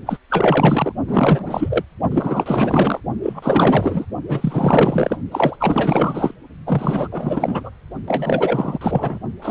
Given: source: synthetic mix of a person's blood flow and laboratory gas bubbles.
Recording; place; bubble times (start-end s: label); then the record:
Doppler ultrasound of blood flow; precordium
0.06-0.17 s: bubbles
0.29-0.92 s: bubbles
1.07-1.83 s: bubbles
2.10-3.00 s: bubbles
3.22-4.05 s: bubbles
4.29-5.17 s: bubbles
5.31-5.56 s: bubbles
5.59-6.34 s: bubbles
6.66-7.08 s: bubbles
7.12-7.71 s: bubbles
8.07-8.79 s: bubbles
8.81-9.19 s: bubbles
9.42-9.51 s: bubbles
From the record:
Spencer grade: 4 (maximum detectable bubble signal sounding continuously throughout systole and diastole of every cardiac period, and overriding the amplitude of the normal cardiac signals); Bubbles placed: only in the low amplitude regions of the cardiac cycle